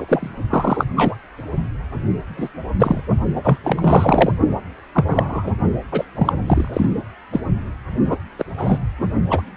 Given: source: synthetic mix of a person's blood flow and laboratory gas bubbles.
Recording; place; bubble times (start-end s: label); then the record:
Doppler ultrasound of blood flow; precordium
0.00-0.29 s: bubbles
0.49-0.85 s: bubbles
0.95-1.15 s: bubbles
2.37-2.49 s: bubbles
2.79-3.02 s: bubbles
3.43-3.58 s: bubbles
3.64-4.33 s: bubbles
4.93-5.51 s: bubbles
5.92-6.04 s: bubbles
6.15-6.33 s: bubbles
6.46-6.69 s: bubbles
6.73-6.92 s: bubbles
7.32-7.40 s: bubbles
8.05-8.16 s: bubbles
8.38-8.45 s: bubbles
8.57-8.78 s: bubbles
9.30-9.42 s: bubbles
From the record:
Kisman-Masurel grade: 243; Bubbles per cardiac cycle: several, 3 to 8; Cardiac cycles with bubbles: 100%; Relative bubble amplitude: loud (0.450 to 0.775); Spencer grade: 3 (all of the cardiac periods contain showers or single bubble signals, but not dominating or overriding the cardiac motion signals); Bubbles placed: only in the low amplitude regions of the cardiac cycle